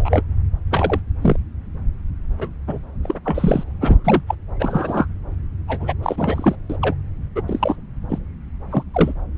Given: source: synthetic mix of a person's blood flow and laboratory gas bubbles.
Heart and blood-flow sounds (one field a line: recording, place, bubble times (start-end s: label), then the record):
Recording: Doppler ultrasound of blood flow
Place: subclavian vein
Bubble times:
0.00-0.22 s: bubbles
0.71-1.00 s: bubbles
1.21-1.36 s: bubbles
2.38-2.49 s: bubbles
2.67-2.78 s: bubbles
3.03-3.18 s: bubbles
3.24-3.63 s: bubbles
3.80-4.21 s: bubbles
4.27-4.35 s: bubbles
4.59-5.06 s: bubbles
5.67-5.93 s: bubbles
6.02-6.58 s: bubbles
6.69-6.77 s: bubbles
6.81-6.96 s: bubbles
7.35-7.42 s: bubbles
7.48-7.75 s: bubbles
8.09-8.19 s: bubbles
8.71-8.83 s: bubbles
8.94-9.13 s: bubbles
From the record:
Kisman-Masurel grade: 243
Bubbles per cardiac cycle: several, 3 to 8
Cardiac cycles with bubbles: 100%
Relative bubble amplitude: loud (0.450 to 0.775)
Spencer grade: 3 (all of the cardiac periods contain showers or single bubble signals, but not dominating or overriding the cardiac motion signals)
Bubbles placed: anywhere in the cardiac cycle